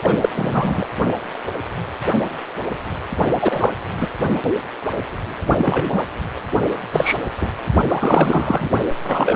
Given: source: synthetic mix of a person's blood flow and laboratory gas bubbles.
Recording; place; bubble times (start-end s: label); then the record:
Doppler ultrasound of blood flow; precordium
0.03-0.17 s: bubbles
0.20-0.29 s: bubbles
0.34-0.85 s: bubbles
3.38-3.72 s: bubbles
3.97-4.08 s: bubbles
5.58-6.03 s: bubbles
6.92-7.18 s: bubbles
7.41-7.49 s: bubbles
7.88-8.69 s: bubbles
9.04-9.36 s: bubbles
From the record:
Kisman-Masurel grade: 233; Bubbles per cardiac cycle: several, 3 to 8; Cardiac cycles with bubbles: 50 to 99%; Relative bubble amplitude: loud (0.450 to 0.775); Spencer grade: 3 (all of the cardiac periods contain showers or single bubble signals, but not dominating or overriding the cardiac motion signals); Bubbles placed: only in the low amplitude regions of the cardiac cycle